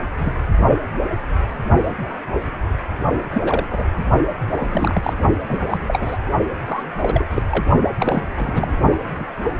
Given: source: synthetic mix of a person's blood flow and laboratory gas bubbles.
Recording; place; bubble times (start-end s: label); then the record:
Doppler ultrasound of blood flow; precordium
0.17-0.34 s: bubbles
3.34-3.67 s: bubbles
3.71-3.85 s: bubbles
3.97-4.06 s: bubbles
4.57-5.16 s: bubbles
5.48-5.58 s: bubbles
5.64-6.17 s: bubbles
6.66-6.83 s: bubbles
7.02-7.25 s: bubbles
7.30-7.42 s: bubbles
7.50-7.65 s: bubbles
7.99-8.23 s: bubbles
8.36-8.76 s: bubbles
8.91-8.99 s: bubbles
9.18-9.25 s: bubbles
From the record:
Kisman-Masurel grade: 232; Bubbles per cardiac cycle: several, 3 to 8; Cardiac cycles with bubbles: 50 to 99%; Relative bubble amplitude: moderate (0.250 to 0.450); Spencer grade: 3 (all of the cardiac periods contain showers or single bubble signals, but not dominating or overriding the cardiac motion signals); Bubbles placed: only in the low amplitude regions of the cardiac cycle